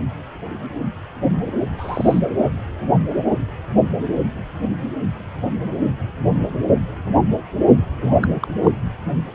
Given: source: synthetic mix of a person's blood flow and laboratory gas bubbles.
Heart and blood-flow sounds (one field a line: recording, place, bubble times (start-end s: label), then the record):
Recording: Doppler ultrasound of blood flow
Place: precordium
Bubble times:
1.78-2.19 s: bubbles
8.02-8.48 s: bubbles
8.63-8.71 s: bubbles
From the record:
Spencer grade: 2 (many but less than half of the cardiac periods contain bubble signals, singularly or in groups)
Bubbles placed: anywhere in the cardiac cycle